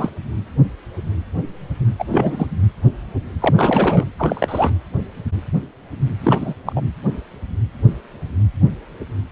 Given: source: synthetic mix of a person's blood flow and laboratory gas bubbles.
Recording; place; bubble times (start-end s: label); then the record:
Doppler ultrasound of blood flow; precordium
0.00-0.10 s: bubbles
1.99-2.05 s: bubbles
2.10-2.47 s: bubbles
3.40-4.04 s: bubbles
4.18-4.73 s: bubbles
6.23-6.54 s: bubbles
6.66-6.72 s: bubbles
6.75-6.81 s: bubbles
From the record:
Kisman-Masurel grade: 223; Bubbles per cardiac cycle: several, 3 to 8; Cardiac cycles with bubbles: 10 to 50%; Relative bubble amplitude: loud (0.450 to 0.775); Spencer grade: 2 (many but less than half of the cardiac periods contain bubble signals, singularly or in groups); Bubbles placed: anywhere in the cardiac cycle